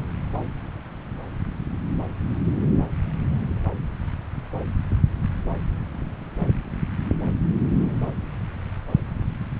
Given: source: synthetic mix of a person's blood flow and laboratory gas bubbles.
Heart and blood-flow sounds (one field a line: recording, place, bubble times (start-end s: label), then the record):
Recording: Doppler ultrasound of blood flow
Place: subclavian vein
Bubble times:
no bubbles
From the record:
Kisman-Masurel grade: 000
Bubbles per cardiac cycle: 0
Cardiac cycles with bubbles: 0%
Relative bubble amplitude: no bubbles discernible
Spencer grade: 0 (complete lack of bubble signals)